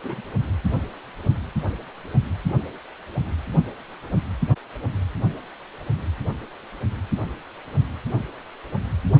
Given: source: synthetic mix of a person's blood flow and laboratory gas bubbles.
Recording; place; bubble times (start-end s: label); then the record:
Doppler ultrasound of blood flow; precordium
0.03-0.21 s: bubbles
From the record:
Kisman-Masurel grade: 111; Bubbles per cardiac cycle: 1 to 2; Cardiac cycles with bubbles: 1 to 10%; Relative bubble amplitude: barely perceptible (0.100 to 0.250); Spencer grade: 1 (occasional bubble signal discernible with the cardiac motion signal, with majority of cardiac periods free of bubbles); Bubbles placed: only in the low amplitude regions of the cardiac cycle